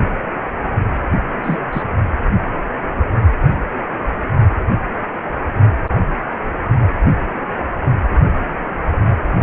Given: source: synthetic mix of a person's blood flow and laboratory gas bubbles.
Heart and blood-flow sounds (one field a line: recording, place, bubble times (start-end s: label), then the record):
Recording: Doppler ultrasound of blood flow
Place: precordium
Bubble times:
1.43-1.59 s: bubbles
1.73-1.83 s: bubbles
From the record:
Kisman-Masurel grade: 122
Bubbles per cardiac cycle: 1 to 2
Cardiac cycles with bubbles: 10 to 50%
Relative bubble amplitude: moderate (0.250 to 0.450)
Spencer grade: 2 (many but less than half of the cardiac periods contain bubble signals, singularly or in groups)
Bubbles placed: only in the low amplitude regions of the cardiac cycle